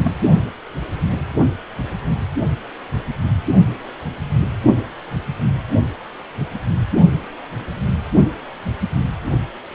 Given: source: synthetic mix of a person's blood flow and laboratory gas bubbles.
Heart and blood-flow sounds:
Doppler ultrasound of blood flow; precordium
0.03-0.12 s: bubbles
From the record:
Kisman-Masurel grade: 112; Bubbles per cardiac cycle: 1 to 2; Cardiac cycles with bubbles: 1 to 10%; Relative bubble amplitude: moderate (0.250 to 0.450); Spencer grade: 1 (occasional bubble signal discernible with the cardiac motion signal, with majority of cardiac periods free of bubbles); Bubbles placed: only in the low amplitude regions of the cardiac cycle

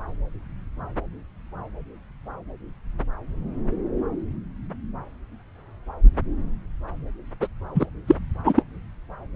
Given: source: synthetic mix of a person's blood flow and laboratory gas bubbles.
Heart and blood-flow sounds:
Doppler ultrasound of blood flow; subclavian vein
7.41-7.47 s: bubbles
7.74-7.86 s: bubbles
8.07-8.15 s: bubbles
8.45-8.63 s: bubbles
From the record:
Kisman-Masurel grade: 213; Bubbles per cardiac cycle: several, 3 to 8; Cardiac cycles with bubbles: 1 to 10%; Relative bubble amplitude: loud (0.450 to 0.775); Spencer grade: 1 (occasional bubble signal discernible with the cardiac motion signal, with majority of cardiac periods free of bubbles); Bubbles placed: anywhere in the cardiac cycle

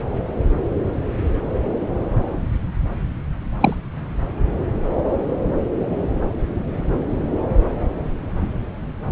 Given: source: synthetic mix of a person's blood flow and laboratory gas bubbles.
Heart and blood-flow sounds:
Doppler ultrasound of blood flow; subclavian vein
3.60-3.75 s: bubbles
From the record:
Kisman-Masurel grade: 113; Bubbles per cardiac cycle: 1 to 2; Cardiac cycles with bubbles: 1 to 10%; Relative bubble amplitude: loud (0.450 to 0.775); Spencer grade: 1 (occasional bubble signal discernible with the cardiac motion signal, with majority of cardiac periods free of bubbles); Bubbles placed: anywhere in the cardiac cycle

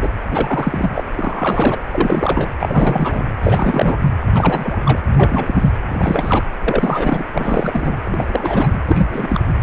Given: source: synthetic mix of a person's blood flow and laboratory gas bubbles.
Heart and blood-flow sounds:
Doppler ultrasound of blood flow; precordium
0.00-0.10 s: bubbles
0.30-1.04 s: bubbles
1.15-1.80 s: bubbles
1.89-2.50 s: bubbles
2.60-3.23 s: bubbles
3.43-3.97 s: bubbles
4.34-5.01 s: bubbles
5.12-5.71 s: bubbles
5.88-6.44 s: bubbles
6.63-7.24 s: bubbles
7.33-7.95 s: bubbles
8.05-8.68 s: bubbles
8.73-8.81 s: bubbles
8.87-9.41 s: bubbles
From the record:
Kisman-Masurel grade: 343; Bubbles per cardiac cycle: rolling drumbeat, 9 or more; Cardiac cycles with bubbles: 100%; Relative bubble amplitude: loud (0.450 to 0.775); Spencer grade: 3 (all of the cardiac periods contain showers or single bubble signals, but not dominating or overriding the cardiac motion signals); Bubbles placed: anywhere in the cardiac cycle

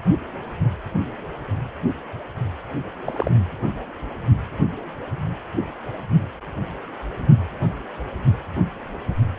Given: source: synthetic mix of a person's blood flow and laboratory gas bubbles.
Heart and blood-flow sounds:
Doppler ultrasound of blood flow; precordium
3.06-3.31 s: bubbles
From the record:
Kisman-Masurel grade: 112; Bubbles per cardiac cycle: 1 to 2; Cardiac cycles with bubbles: 1 to 10%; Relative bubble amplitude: moderate (0.250 to 0.450); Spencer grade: 1 (occasional bubble signal discernible with the cardiac motion signal, with majority of cardiac periods free of bubbles); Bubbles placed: anywhere in the cardiac cycle

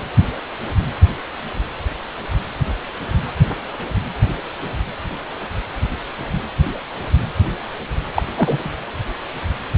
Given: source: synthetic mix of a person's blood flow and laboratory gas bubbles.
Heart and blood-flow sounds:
Doppler ultrasound of blood flow; precordium
8.15-8.23 s: bubbles
8.35-8.71 s: bubbles
From the record:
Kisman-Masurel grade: 113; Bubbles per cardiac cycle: 1 to 2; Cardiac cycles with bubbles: 1 to 10%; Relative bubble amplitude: loud (0.450 to 0.775); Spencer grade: 1 (occasional bubble signal discernible with the cardiac motion signal, with majority of cardiac periods free of bubbles); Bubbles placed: anywhere in the cardiac cycle

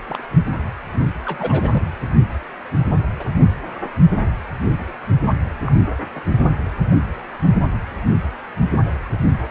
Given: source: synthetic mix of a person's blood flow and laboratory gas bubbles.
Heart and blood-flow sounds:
Doppler ultrasound of blood flow; precordium
0.08-0.23 s: bubbles
1.25-1.89 s: bubbles
3.19-3.24 s: bubbles
5.66-5.73 s: bubbles
6.15-6.21 s: bubbles
From the record:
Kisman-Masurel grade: 121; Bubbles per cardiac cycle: 1 to 2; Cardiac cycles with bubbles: 10 to 50%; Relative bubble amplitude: barely perceptible (0.100 to 0.250); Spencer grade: 2 (many but less than half of the cardiac periods contain bubble signals, singularly or in groups); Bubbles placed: only in the low amplitude regions of the cardiac cycle

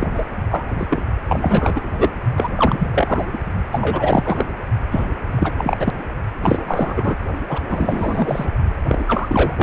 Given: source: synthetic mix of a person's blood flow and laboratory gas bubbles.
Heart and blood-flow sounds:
Doppler ultrasound of blood flow; precordium
0.00-0.07 s: bubbles
0.14-0.26 s: bubbles
0.51-0.67 s: bubbles
0.78-0.86 s: bubbles
0.90-1.02 s: bubbles
1.28-2.11 s: bubbles
2.37-2.48 s: bubbles
2.57-2.88 s: bubbles
2.94-3.26 s: bubbles
3.33-3.38 s: bubbles
3.72-4.45 s: bubbles
4.91-5.06 s: bubbles
5.31-5.54 s: bubbles
5.58-5.94 s: bubbles
6.42-6.63 s: bubbles
6.67-7.17 s: bubbles
7.48-7.63 s: bubbles
7.70-8.50 s: bubbles
8.88-9.04 s: bubbles
9.07-9.54 s: bubbles
9.57-9.63 s: bubbles
From the record:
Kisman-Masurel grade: 343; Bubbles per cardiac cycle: rolling drumbeat, 9 or more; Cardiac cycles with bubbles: 100%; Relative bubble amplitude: loud (0.450 to 0.775); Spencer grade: 3 (all of the cardiac periods contain showers or single bubble signals, but not dominating or overriding the cardiac motion signals); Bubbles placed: only in the low amplitude regions of the cardiac cycle

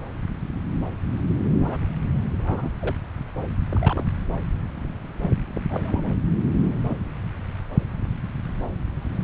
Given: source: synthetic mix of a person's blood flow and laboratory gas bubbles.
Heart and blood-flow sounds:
Doppler ultrasound of blood flow; subclavian vein
1.53-1.86 s: bubbles
2.39-2.70 s: bubbles
2.81-2.95 s: bubbles
3.70-4.04 s: bubbles
5.54-5.62 s: bubbles
5.69-6.02 s: bubbles
6.88-7.00 s: bubbles
From the record:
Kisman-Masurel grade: 122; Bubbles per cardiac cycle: 1 to 2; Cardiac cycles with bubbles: 10 to 50%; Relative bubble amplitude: moderate (0.250 to 0.450); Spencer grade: 2 (many but less than half of the cardiac periods contain bubble signals, singularly or in groups); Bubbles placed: anywhere in the cardiac cycle

